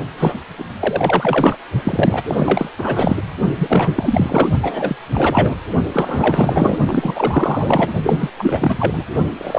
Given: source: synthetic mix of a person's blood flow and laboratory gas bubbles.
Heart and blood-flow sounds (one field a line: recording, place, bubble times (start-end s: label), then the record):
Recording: Doppler ultrasound of blood flow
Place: precordium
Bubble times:
0.17-0.40 s: bubbles
0.58-0.64 s: bubbles
0.81-1.56 s: bubbles
1.84-2.21 s: bubbles
2.28-2.69 s: bubbles
2.78-3.17 s: bubbles
3.54-4.49 s: bubbles
4.62-4.96 s: bubbles
5.12-5.55 s: bubbles
5.93-6.78 s: bubbles
6.86-7.92 s: bubbles
8.03-8.29 s: bubbles
8.38-9.05 s: bubbles
9.38-9.59 s: bubbles
From the record:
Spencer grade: 4 (maximum detectable bubble signal sounding continuously throughout systole and diastole of every cardiac period, and overriding the amplitude of the normal cardiac signals)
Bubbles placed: only in the low amplitude regions of the cardiac cycle